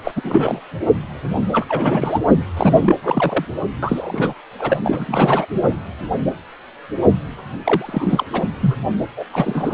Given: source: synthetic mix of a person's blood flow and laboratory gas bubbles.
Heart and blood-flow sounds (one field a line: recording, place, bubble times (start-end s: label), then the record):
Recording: Doppler ultrasound of blood flow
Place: precordium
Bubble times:
0.04-0.11 s: bubbles
0.15-0.61 s: bubbles
1.52-1.65 s: bubbles
1.69-2.19 s: bubbles
2.56-2.96 s: bubbles
3.02-3.45 s: bubbles
3.83-4.33 s: bubbles
4.58-4.78 s: bubbles
4.83-5.46 s: bubbles
7.63-8.24 s: bubbles
8.32-8.48 s: bubbles
8.60-8.76 s: bubbles
9.16-9.25 s: bubbles
9.32-9.74 s: bubbles
From the record:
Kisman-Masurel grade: 332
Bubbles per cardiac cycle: rolling drumbeat, 9 or more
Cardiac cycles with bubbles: 50 to 99%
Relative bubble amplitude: moderate (0.250 to 0.450)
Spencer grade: 3 (all of the cardiac periods contain showers or single bubble signals, but not dominating or overriding the cardiac motion signals)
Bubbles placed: anywhere in the cardiac cycle